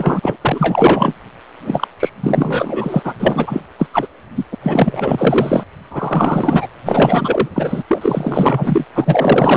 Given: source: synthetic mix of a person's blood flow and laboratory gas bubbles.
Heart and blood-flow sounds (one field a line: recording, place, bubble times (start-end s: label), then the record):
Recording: Doppler ultrasound of blood flow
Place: precordium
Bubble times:
0.00-0.20 s: bubbles
0.22-0.36 s: bubbles
0.41-1.15 s: bubbles
1.64-1.88 s: bubbles
1.99-2.09 s: bubbles
2.22-3.13 s: bubbles
3.19-3.60 s: bubbles
3.79-3.88 s: bubbles
3.93-4.08 s: bubbles
4.35-4.45 s: bubbles
4.52-4.55 s: bubbles
4.63-5.63 s: bubbles
5.91-6.67 s: bubbles
6.85-7.48 s: bubbles
7.54-7.83 s: bubbles
7.88-8.85 s: bubbles
8.95-9.57 s: bubbles
From the record:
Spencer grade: 4 (maximum detectable bubble signal sounding continuously throughout systole and diastole of every cardiac period, and overriding the amplitude of the normal cardiac signals)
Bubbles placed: anywhere in the cardiac cycle